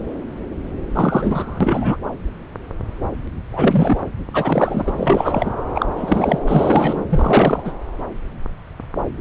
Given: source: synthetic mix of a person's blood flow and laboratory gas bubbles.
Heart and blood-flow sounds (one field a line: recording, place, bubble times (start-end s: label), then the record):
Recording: Doppler ultrasound of blood flow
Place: subclavian vein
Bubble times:
0.94-1.97 s: bubbles
3.49-4.00 s: bubbles
4.33-4.92 s: bubbles
4.96-5.53 s: bubbles
5.75-5.86 s: bubbles
5.96-6.40 s: bubbles
6.47-7.05 s: bubbles
7.09-7.62 s: bubbles
7.64-7.72 s: bubbles
From the record:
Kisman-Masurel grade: 333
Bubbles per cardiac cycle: rolling drumbeat, 9 or more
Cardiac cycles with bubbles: 50 to 99%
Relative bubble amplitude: loud (0.450 to 0.775)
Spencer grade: 3 (all of the cardiac periods contain showers or single bubble signals, but not dominating or overriding the cardiac motion signals)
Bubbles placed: anywhere in the cardiac cycle